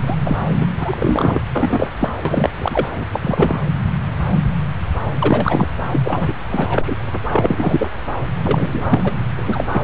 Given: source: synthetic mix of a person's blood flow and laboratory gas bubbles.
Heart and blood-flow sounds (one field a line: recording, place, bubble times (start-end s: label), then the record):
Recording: Doppler ultrasound of blood flow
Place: subclavian vein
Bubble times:
0.00-0.16 s: bubbles
0.24-0.36 s: bubbles
0.60-0.66 s: bubbles
0.79-1.40 s: bubbles
1.51-1.88 s: bubbles
1.99-2.09 s: bubbles
2.25-2.50 s: bubbles
2.58-2.89 s: bubbles
2.96-3.05 s: bubbles
3.11-3.59 s: bubbles
5.20-5.76 s: bubbles
5.92-6.33 s: bubbles
6.49-6.95 s: bubbles
7.33-7.89 s: bubbles
8.43-8.99 s: bubbles
9.04-9.12 s: bubbles
9.36-9.67 s: bubbles
9.74-9.81 s: bubbles
From the record:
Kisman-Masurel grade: 233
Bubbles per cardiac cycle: several, 3 to 8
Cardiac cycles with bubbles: 50 to 99%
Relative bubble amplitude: loud (0.450 to 0.775)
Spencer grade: 3 (all of the cardiac periods contain showers or single bubble signals, but not dominating or overriding the cardiac motion signals)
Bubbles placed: anywhere in the cardiac cycle